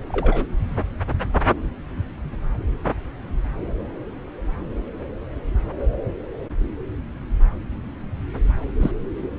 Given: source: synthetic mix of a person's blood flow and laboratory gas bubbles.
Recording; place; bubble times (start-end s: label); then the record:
Doppler ultrasound of blood flow; subclavian vein
0.10-0.45 s: bubbles
8.80-8.92 s: bubbles
From the record:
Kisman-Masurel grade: 122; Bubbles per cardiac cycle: 1 to 2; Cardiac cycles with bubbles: 10 to 50%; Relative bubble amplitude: moderate (0.250 to 0.450); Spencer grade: 2 (many but less than half of the cardiac periods contain bubble signals, singularly or in groups); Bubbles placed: anywhere in the cardiac cycle